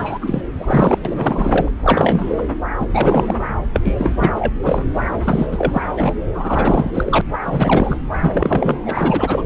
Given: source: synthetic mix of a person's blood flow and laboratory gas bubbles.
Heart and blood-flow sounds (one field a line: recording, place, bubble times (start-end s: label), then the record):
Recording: Doppler ultrasound of blood flow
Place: subclavian vein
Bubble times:
0.00-0.18 s: bubbles
0.21-0.41 s: bubbles
0.59-0.98 s: bubbles
1.05-1.68 s: bubbles
1.83-2.33 s: bubbles
2.38-2.42 s: bubbles
2.79-2.88 s: bubbles
2.93-3.40 s: bubbles
3.74-3.80 s: bubbles
3.84-3.96 s: bubbles
3.99-4.53 s: bubbles
4.62-4.83 s: bubbles
5.23-5.46 s: bubbles
5.52-5.82 s: bubbles
5.96-6.12 s: bubbles
6.33-6.91 s: bubbles
6.94-7.21 s: bubbles
7.42-7.97 s: bubbles
8.10-8.79 s: bubbles
8.86-9.44 s: bubbles
From the record:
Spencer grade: 3 (all of the cardiac periods contain showers or single bubble signals, but not dominating or overriding the cardiac motion signals)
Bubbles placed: anywhere in the cardiac cycle